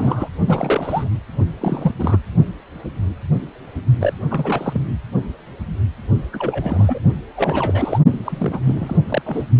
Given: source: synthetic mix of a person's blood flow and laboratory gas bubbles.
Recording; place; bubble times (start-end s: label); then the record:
Doppler ultrasound of blood flow; precordium
0.00-0.31 s: bubbles
0.46-1.08 s: bubbles
1.61-1.94 s: bubbles
1.99-2.20 s: bubbles
4.00-4.13 s: bubbles
4.31-4.83 s: bubbles
6.33-6.99 s: bubbles
7.36-7.99 s: bubbles
8.08-8.60 s: bubbles
8.62-8.97 s: bubbles
9.08-9.22 s: bubbles
9.25-9.47 s: bubbles
From the record:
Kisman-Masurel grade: 332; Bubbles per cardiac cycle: rolling drumbeat, 9 or more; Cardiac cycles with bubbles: 50 to 99%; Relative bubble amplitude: moderate (0.250 to 0.450); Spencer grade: 3 (all of the cardiac periods contain showers or single bubble signals, but not dominating or overriding the cardiac motion signals); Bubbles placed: only in the low amplitude regions of the cardiac cycle